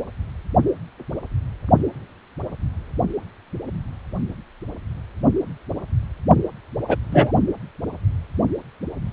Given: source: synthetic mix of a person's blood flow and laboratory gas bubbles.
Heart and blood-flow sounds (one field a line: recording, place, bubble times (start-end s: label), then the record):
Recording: Doppler ultrasound of blood flow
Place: precordium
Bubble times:
6.88-6.96 s: bubbles
7.12-7.31 s: bubbles
From the record:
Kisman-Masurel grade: 223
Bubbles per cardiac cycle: several, 3 to 8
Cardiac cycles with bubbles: 10 to 50%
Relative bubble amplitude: loud (0.450 to 0.775)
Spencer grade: 2 (many but less than half of the cardiac periods contain bubble signals, singularly or in groups)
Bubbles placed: only in the low amplitude regions of the cardiac cycle